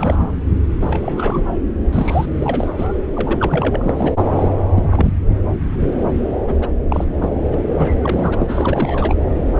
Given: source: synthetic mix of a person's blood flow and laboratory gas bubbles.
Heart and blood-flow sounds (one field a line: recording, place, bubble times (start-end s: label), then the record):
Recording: Doppler ultrasound of blood flow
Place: subclavian vein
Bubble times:
0.00-0.27 s: bubbles
0.81-1.58 s: bubbles
1.93-2.25 s: bubbles
2.40-2.69 s: bubbles
2.76-2.88 s: bubbles
3.13-4.13 s: bubbles
4.17-4.30 s: bubbles
4.36-4.48 s: bubbles
4.75-5.17 s: bubbles
6.47-6.55 s: bubbles
6.60-6.71 s: bubbles
6.90-7.04 s: bubbles
7.21-7.29 s: bubbles
7.52-7.54 s: bubbles
7.78-8.01 s: bubbles
8.04-8.37 s: bubbles
8.39-9.14 s: bubbles
From the record:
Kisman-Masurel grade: 332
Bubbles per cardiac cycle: rolling drumbeat, 9 or more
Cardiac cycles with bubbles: 50 to 99%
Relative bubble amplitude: moderate (0.250 to 0.450)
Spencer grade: 3 (all of the cardiac periods contain showers or single bubble signals, but not dominating or overriding the cardiac motion signals)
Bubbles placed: anywhere in the cardiac cycle